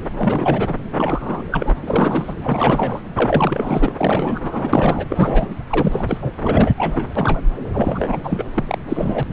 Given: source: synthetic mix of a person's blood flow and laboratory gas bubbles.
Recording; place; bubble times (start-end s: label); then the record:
Doppler ultrasound of blood flow; subclavian vein
0.17-0.75 s: bubbles
0.97-1.42 s: bubbles
1.52-1.70 s: bubbles
1.86-2.34 s: bubbles
2.42-3.01 s: bubbles
3.15-3.93 s: bubbles
3.98-4.39 s: bubbles
4.42-5.06 s: bubbles
5.09-5.46 s: bubbles
5.69-6.17 s: bubbles
6.21-6.32 s: bubbles
6.42-6.74 s: bubbles
6.77-7.06 s: bubbles
7.15-7.40 s: bubbles
7.73-8.21 s: bubbles
8.23-8.46 s: bubbles
8.56-8.77 s: bubbles
8.88-9.23 s: bubbles
9.29-9.33 s: bubbles
From the record:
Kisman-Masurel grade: 342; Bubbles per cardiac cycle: rolling drumbeat, 9 or more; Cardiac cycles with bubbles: 100%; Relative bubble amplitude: moderate (0.250 to 0.450); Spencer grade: 3 (all of the cardiac periods contain showers or single bubble signals, but not dominating or overriding the cardiac motion signals); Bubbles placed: anywhere in the cardiac cycle